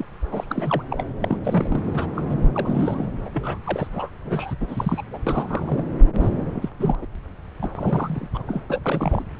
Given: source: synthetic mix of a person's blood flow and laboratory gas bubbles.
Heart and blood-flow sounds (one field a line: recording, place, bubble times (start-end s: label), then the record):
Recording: Doppler ultrasound of blood flow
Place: subclavian vein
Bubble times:
0.00-0.06 s: bubbles
0.32-0.83 s: bubbles
0.90-1.04 s: bubbles
1.21-2.08 s: bubbles
2.15-2.24 s: bubbles
2.29-3.10 s: bubbles
3.25-3.29 s: bubbles
3.31-3.58 s: bubbles
3.64-4.11 s: bubbles
4.25-4.54 s: bubbles
4.60-5.02 s: bubbles
5.12-5.19 s: bubbles
5.26-5.85 s: bubbles
6.20-6.70 s: bubbles
6.79-6.96 s: bubbles
7.01-7.08 s: bubbles
7.62-7.70 s: bubbles
7.75-8.28 s: bubbles
8.33-8.61 s: bubbles
8.69-9.24 s: bubbles
From the record:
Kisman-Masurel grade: 342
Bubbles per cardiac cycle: rolling drumbeat, 9 or more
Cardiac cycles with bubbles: 100%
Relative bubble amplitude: moderate (0.250 to 0.450)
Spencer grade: 3 (all of the cardiac periods contain showers or single bubble signals, but not dominating or overriding the cardiac motion signals)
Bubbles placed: anywhere in the cardiac cycle